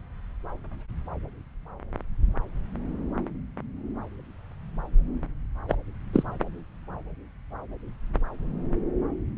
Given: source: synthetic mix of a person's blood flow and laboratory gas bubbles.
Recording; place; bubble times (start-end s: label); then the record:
Doppler ultrasound of blood flow; subclavian vein
5.68-5.77 s: bubbles
6.12-6.23 s: bubbles
From the record:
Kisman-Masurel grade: 122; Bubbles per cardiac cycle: 1 to 2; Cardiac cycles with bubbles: 10 to 50%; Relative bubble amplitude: moderate (0.250 to 0.450); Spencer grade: 2 (many but less than half of the cardiac periods contain bubble signals, singularly or in groups); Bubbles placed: anywhere in the cardiac cycle